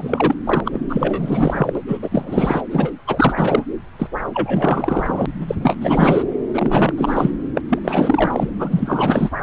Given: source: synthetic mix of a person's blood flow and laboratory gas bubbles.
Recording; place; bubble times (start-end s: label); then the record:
Doppler ultrasound of blood flow; subclavian vein
0.00-0.36 s: bubbles
0.44-0.60 s: bubbles
0.64-0.80 s: bubbles
0.89-1.72 s: bubbles
1.75-1.80 s: bubbles
1.88-1.98 s: bubbles
2.02-2.61 s: bubbles
2.70-2.90 s: bubbles
3.07-3.33 s: bubbles
3.36-3.64 s: bubbles
3.98-4.08 s: bubbles
4.33-5.26 s: bubbles
5.48-5.56 s: bubbles
5.60-5.75 s: bubbles
5.80-6.24 s: bubbles
6.54-6.94 s: bubbles
6.97-7.31 s: bubbles
7.54-7.61 s: bubbles
7.69-7.79 s: bubbles
7.84-8.48 s: bubbles
8.59-9.30 s: bubbles
From the record:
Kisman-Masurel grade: 444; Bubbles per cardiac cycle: continuous sound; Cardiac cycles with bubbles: 100%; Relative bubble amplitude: maximal (0.775 to 0.999); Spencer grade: 4 (maximum detectable bubble signal sounding continuously throughout systole and diastole of every cardiac period, and overriding the amplitude of the normal cardiac signals); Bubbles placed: anywhere in the cardiac cycle